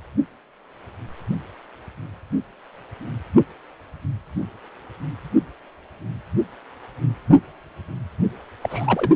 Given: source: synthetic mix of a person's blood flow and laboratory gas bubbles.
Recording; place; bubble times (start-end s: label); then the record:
Doppler ultrasound of blood flow; precordium
8.61-9.11 s: bubbles
From the record:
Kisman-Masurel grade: 222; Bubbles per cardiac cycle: several, 3 to 8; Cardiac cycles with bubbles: 10 to 50%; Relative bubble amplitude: moderate (0.250 to 0.450); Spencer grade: 2 (many but less than half of the cardiac periods contain bubble signals, singularly or in groups); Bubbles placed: anywhere in the cardiac cycle